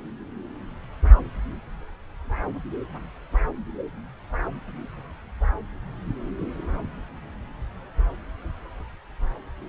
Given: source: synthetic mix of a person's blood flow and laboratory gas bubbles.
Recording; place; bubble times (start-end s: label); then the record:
Doppler ultrasound of blood flow; subclavian vein
no bubbles
From the record:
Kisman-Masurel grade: 000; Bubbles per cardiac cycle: 0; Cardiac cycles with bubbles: 0%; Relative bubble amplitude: no bubbles discernible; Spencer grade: 0 (complete lack of bubble signals)